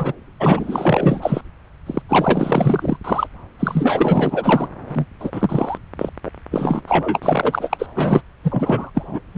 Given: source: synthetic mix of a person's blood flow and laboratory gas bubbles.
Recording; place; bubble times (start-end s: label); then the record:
Doppler ultrasound of blood flow; subclavian vein
0.00-0.13 s: bubbles
0.40-1.42 s: bubbles
1.86-2.02 s: bubbles
2.08-2.97 s: bubbles
3.04-3.27 s: bubbles
3.59-4.68 s: bubbles
4.88-5.06 s: bubbles
5.20-5.77 s: bubbles
5.98-6.09 s: bubbles
6.25-6.31 s: bubbles
6.51-6.81 s: bubbles
6.88-7.87 s: bubbles
7.95-8.22 s: bubbles
8.43-8.90 s: bubbles
8.94-9.20 s: bubbles
9.34-9.38 s: bubbles
From the record:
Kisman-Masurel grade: 444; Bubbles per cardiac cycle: continuous sound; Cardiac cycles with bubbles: 100%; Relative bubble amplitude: maximal (0.775 to 0.999); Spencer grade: 4 (maximum detectable bubble signal sounding continuously throughout systole and diastole of every cardiac period, and overriding the amplitude of the normal cardiac signals); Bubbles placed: anywhere in the cardiac cycle